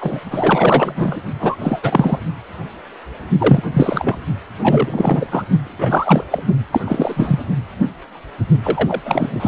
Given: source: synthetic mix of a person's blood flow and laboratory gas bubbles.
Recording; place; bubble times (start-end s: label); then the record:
Doppler ultrasound of blood flow; precordium
0.01-0.19 s: bubbles
0.30-1.21 s: bubbles
1.40-1.56 s: bubbles
1.61-1.79 s: bubbles
1.83-2.19 s: bubbles
3.38-3.63 s: bubbles
3.73-4.16 s: bubbles
4.60-5.27 s: bubbles
5.30-5.45 s: bubbles
5.64-6.24 s: bubbles
6.31-6.45 s: bubbles
6.72-6.82 s: bubbles
6.85-7.42 s: bubbles
8.63-9.01 s: bubbles
9.05-9.48 s: bubbles
From the record:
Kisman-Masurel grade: 333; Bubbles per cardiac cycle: rolling drumbeat, 9 or more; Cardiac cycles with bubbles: 50 to 99%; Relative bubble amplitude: loud (0.450 to 0.775); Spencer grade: 3 (all of the cardiac periods contain showers or single bubble signals, but not dominating or overriding the cardiac motion signals); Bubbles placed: only in the low amplitude regions of the cardiac cycle